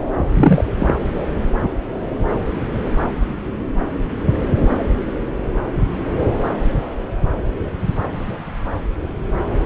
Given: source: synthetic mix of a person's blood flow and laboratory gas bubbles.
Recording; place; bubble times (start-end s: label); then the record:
Doppler ultrasound of blood flow; subclavian vein
0.33-0.65 s: bubbles
0.80-0.94 s: bubbles
From the record:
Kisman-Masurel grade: 213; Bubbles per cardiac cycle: several, 3 to 8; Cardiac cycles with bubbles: 1 to 10%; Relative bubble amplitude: loud (0.450 to 0.775); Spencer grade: 1 (occasional bubble signal discernible with the cardiac motion signal, with majority of cardiac periods free of bubbles); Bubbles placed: anywhere in the cardiac cycle